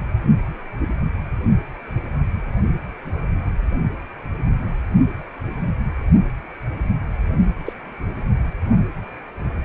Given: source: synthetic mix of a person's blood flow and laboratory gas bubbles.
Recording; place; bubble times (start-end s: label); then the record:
Doppler ultrasound of blood flow; precordium
7.66-7.73 s: bubbles
From the record:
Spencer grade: 2 (many but less than half of the cardiac periods contain bubble signals, singularly or in groups); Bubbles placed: only in the low amplitude regions of the cardiac cycle